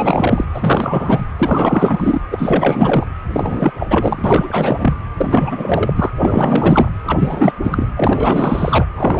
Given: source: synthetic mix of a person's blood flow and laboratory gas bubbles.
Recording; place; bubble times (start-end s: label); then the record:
Doppler ultrasound of blood flow; precordium
0.00-0.46 s: bubbles
0.53-1.25 s: bubbles
1.38-2.21 s: bubbles
2.30-3.07 s: bubbles
3.31-3.73 s: bubbles
3.78-3.87 s: bubbles
3.90-4.94 s: bubbles
5.17-5.93 s: bubbles
5.96-6.10 s: bubbles
6.18-6.90 s: bubbles
7.02-7.54 s: bubbles
7.64-7.86 s: bubbles
7.96-8.86 s: bubbles
8.93-9.20 s: bubbles
From the record:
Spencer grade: 4 (maximum detectable bubble signal sounding continuously throughout systole and diastole of every cardiac period, and overriding the amplitude of the normal cardiac signals); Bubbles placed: anywhere in the cardiac cycle